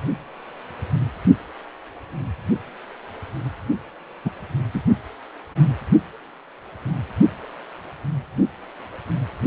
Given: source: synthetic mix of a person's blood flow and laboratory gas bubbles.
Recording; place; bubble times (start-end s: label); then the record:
Doppler ultrasound of blood flow; precordium
4.24-4.30 s: bubbles
4.73-4.82 s: bubbles
From the record:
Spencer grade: 1 (occasional bubble signal discernible with the cardiac motion signal, with majority of cardiac periods free of bubbles); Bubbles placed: only in the low amplitude regions of the cardiac cycle